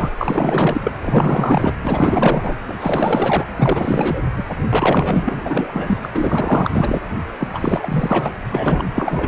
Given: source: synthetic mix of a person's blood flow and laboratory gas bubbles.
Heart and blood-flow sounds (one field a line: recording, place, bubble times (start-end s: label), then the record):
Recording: Doppler ultrasound of blood flow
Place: precordium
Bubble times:
0.00-0.10 s: bubbles
0.17-0.96 s: bubbles
1.02-1.73 s: bubbles
1.83-2.55 s: bubbles
2.67-3.45 s: bubbles
3.56-4.25 s: bubbles
4.36-4.45 s: bubbles
4.69-5.98 s: bubbles
6.03-6.10 s: bubbles
6.14-7.02 s: bubbles
7.40-7.49 s: bubbles
7.53-8.33 s: bubbles
8.54-8.88 s: bubbles
8.93-9.28 s: bubbles
From the record:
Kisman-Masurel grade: 444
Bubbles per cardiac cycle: continuous sound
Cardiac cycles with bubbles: 100%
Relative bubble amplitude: maximal (0.775 to 0.999)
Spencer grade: 4 (maximum detectable bubble signal sounding continuously throughout systole and diastole of every cardiac period, and overriding the amplitude of the normal cardiac signals)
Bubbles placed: anywhere in the cardiac cycle